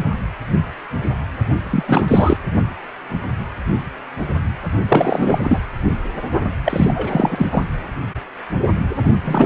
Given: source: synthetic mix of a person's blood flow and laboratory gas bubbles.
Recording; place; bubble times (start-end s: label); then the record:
Doppler ultrasound of blood flow; precordium
1.63-2.37 s: bubbles
4.88-5.62 s: bubbles
6.65-7.63 s: bubbles
9.25-9.46 s: bubbles
From the record:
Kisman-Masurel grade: 333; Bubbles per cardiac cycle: rolling drumbeat, 9 or more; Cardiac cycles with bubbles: 50 to 99%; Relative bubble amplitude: loud (0.450 to 0.775); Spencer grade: 3 (all of the cardiac periods contain showers or single bubble signals, but not dominating or overriding the cardiac motion signals); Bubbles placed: only in the low amplitude regions of the cardiac cycle